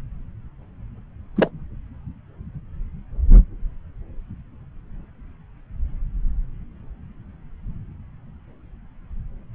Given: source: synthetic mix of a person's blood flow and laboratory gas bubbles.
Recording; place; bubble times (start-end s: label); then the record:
Doppler ultrasound of blood flow; subclavian vein
1.36-1.50 s: bubbles
From the record:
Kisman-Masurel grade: 122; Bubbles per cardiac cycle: 1 to 2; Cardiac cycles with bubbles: 10 to 50%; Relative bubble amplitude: moderate (0.250 to 0.450); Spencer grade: 2 (many but less than half of the cardiac periods contain bubble signals, singularly or in groups); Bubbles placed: anywhere in the cardiac cycle